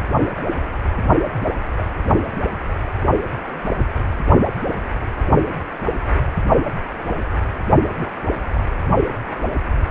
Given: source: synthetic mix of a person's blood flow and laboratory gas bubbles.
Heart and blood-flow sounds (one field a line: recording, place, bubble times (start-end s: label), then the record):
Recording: Doppler ultrasound of blood flow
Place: precordium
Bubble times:
1.41-1.46 s: bubbles
1.76-1.86 s: bubbles
7.99-8.09 s: bubbles
8.54-8.67 s: bubbles
From the record:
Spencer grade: 2 (many but less than half of the cardiac periods contain bubble signals, singularly or in groups)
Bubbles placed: only in the low amplitude regions of the cardiac cycle